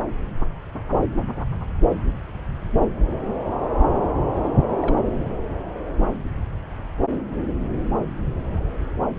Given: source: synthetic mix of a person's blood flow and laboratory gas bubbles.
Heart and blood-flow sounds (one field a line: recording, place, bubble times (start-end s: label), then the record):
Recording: Doppler ultrasound of blood flow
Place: subclavian vein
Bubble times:
4.79-4.96 s: bubbles
From the record:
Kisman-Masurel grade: 111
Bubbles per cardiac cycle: 1 to 2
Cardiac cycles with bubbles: 1 to 10%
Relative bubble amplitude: barely perceptible (0.100 to 0.250)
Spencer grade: 1 (occasional bubble signal discernible with the cardiac motion signal, with majority of cardiac periods free of bubbles)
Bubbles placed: anywhere in the cardiac cycle